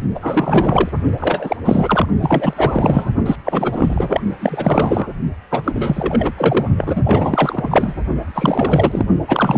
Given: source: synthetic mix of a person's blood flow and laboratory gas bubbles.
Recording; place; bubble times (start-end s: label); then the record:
Doppler ultrasound of blood flow; precordium
0.15-0.90 s: bubbles
1.20-1.57 s: bubbles
1.64-2.06 s: bubbles
2.20-3.12 s: bubbles
3.25-3.35 s: bubbles
3.44-4.21 s: bubbles
4.40-5.11 s: bubbles
5.50-6.32 s: bubbles
6.37-6.66 s: bubbles
6.77-7.94 s: bubbles
8.35-9.05 s: bubbles
9.27-9.58 s: bubbles
From the record:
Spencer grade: 4 (maximum detectable bubble signal sounding continuously throughout systole and diastole of every cardiac period, and overriding the amplitude of the normal cardiac signals); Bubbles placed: only in the low amplitude regions of the cardiac cycle